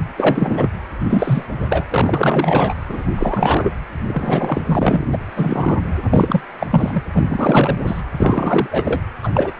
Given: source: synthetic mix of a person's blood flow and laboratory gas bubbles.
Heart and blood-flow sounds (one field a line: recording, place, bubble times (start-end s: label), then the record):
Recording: Doppler ultrasound of blood flow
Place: precordium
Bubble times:
0.17-0.68 s: bubbles
1.08-1.47 s: bubbles
1.61-1.85 s: bubbles
1.90-2.75 s: bubbles
2.88-3.03 s: bubbles
3.17-3.71 s: bubbles
4.07-4.62 s: bubbles
4.65-5.05 s: bubbles
5.11-5.18 s: bubbles
5.36-5.76 s: bubbles
6.11-6.41 s: bubbles
6.60-6.67 s: bubbles
6.71-7.03 s: bubbles
7.12-7.23 s: bubbles
7.26-7.76 s: bubbles
7.86-8.02 s: bubbles
8.17-8.68 s: bubbles
8.71-9.01 s: bubbles
9.22-9.30 s: bubbles
9.34-9.52 s: bubbles
From the record:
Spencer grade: 3 (all of the cardiac periods contain showers or single bubble signals, but not dominating or overriding the cardiac motion signals)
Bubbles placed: anywhere in the cardiac cycle